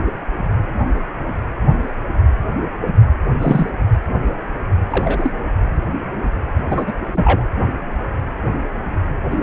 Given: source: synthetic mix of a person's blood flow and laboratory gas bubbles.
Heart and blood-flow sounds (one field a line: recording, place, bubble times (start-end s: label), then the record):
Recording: Doppler ultrasound of blood flow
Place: precordium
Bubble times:
3.41-3.70 s: bubbles
4.90-5.34 s: bubbles
6.70-6.94 s: bubbles
7.12-7.47 s: bubbles
9.30-9.36 s: bubbles
From the record:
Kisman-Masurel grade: 223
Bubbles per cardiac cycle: several, 3 to 8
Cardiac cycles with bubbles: 10 to 50%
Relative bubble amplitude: loud (0.450 to 0.775)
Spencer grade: 2 (many but less than half of the cardiac periods contain bubble signals, singularly or in groups)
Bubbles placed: anywhere in the cardiac cycle